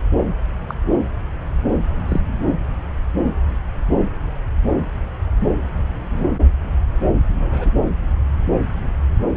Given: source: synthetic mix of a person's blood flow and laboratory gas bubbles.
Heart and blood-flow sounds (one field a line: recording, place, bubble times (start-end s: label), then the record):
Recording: Doppler ultrasound of blood flow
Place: subclavian vein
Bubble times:
0.69-0.74 s: bubbles
2.08-2.21 s: bubbles
6.10-6.27 s: bubbles
7.36-7.73 s: bubbles
From the record:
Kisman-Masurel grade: 121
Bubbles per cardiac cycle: 1 to 2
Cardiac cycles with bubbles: 10 to 50%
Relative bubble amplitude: barely perceptible (0.100 to 0.250)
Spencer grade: 2 (many but less than half of the cardiac periods contain bubble signals, singularly or in groups)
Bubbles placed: anywhere in the cardiac cycle